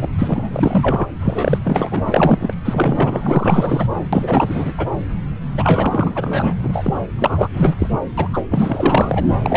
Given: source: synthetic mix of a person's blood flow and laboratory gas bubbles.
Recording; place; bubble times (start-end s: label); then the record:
Doppler ultrasound of blood flow; subclavian vein
0.01-0.08 s: bubbles
0.18-1.06 s: bubbles
1.20-1.59 s: bubbles
1.64-2.54 s: bubbles
2.64-3.87 s: bubbles
4.12-4.74 s: bubbles
4.77-4.88 s: bubbles
5.57-6.55 s: bubbles
6.63-6.94 s: bubbles
7.19-7.48 s: bubbles
7.53-7.88 s: bubbles
7.91-7.99 s: bubbles
8.18-8.38 s: bubbles
8.51-9.26 s: bubbles
9.42-9.57 s: bubbles
From the record:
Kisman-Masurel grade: 444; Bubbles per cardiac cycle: continuous sound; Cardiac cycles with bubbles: 100%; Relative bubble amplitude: maximal (0.775 to 0.999); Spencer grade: 4 (maximum detectable bubble signal sounding continuously throughout systole and diastole of every cardiac period, and overriding the amplitude of the normal cardiac signals); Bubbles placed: anywhere in the cardiac cycle